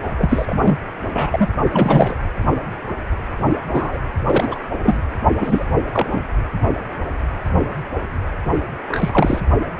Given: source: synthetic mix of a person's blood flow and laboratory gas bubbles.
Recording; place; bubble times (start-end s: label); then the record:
Doppler ultrasound of blood flow; precordium
0.17-0.78 s: bubbles
1.14-1.47 s: bubbles
1.72-2.17 s: bubbles
3.67-3.99 s: bubbles
4.25-4.63 s: bubbles
4.83-5.02 s: bubbles
5.39-5.65 s: bubbles
5.93-6.07 s: bubbles
6.10-6.21 s: bubbles
8.88-9.43 s: bubbles
From the record:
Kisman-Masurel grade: 233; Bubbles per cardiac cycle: several, 3 to 8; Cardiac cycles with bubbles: 50 to 99%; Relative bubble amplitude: loud (0.450 to 0.775); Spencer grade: 3 (all of the cardiac periods contain showers or single bubble signals, but not dominating or overriding the cardiac motion signals); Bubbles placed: only in the low amplitude regions of the cardiac cycle